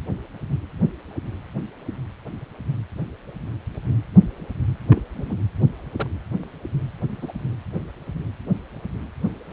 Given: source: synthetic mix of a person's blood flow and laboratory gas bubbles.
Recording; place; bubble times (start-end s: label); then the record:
Doppler ultrasound of blood flow; precordium
4.90-5.02 s: bubbles
5.17-5.36 s: bubbles
5.96-6.08 s: bubbles
7.21-7.32 s: bubbles
9.50-9.53 s: bubbles
From the record:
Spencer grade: 2 (many but less than half of the cardiac periods contain bubble signals, singularly or in groups); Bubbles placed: anywhere in the cardiac cycle